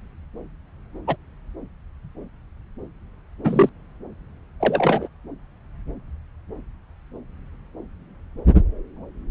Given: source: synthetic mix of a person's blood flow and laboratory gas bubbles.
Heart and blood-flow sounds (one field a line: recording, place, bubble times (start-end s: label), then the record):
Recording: Doppler ultrasound of blood flow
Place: subclavian vein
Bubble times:
1.07-1.16 s: bubbles
3.44-3.70 s: bubbles
4.60-5.08 s: bubbles
From the record:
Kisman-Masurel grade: 123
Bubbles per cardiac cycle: 1 to 2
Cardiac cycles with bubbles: 10 to 50%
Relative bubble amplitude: loud (0.450 to 0.775)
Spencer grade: 2 (many but less than half of the cardiac periods contain bubble signals, singularly or in groups)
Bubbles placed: anywhere in the cardiac cycle